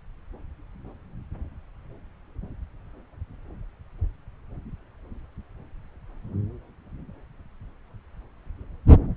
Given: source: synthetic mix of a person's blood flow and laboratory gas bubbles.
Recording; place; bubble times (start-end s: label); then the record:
Doppler ultrasound of blood flow; subclavian vein
no bubbles
From the record:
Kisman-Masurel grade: 000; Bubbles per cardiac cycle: 0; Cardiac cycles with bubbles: 0%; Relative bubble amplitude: no bubbles discernible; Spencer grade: 0 (complete lack of bubble signals)